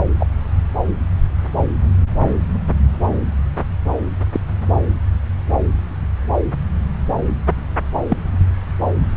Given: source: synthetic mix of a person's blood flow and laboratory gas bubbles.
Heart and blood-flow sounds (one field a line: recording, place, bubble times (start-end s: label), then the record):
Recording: Doppler ultrasound of blood flow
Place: subclavian vein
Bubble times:
0.20-0.26 s: bubbles
4.33-4.40 s: bubbles
8.08-8.17 s: bubbles
From the record:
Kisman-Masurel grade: 122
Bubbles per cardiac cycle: 1 to 2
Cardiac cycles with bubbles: 10 to 50%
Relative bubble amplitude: moderate (0.250 to 0.450)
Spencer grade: 2 (many but less than half of the cardiac periods contain bubble signals, singularly or in groups)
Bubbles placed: anywhere in the cardiac cycle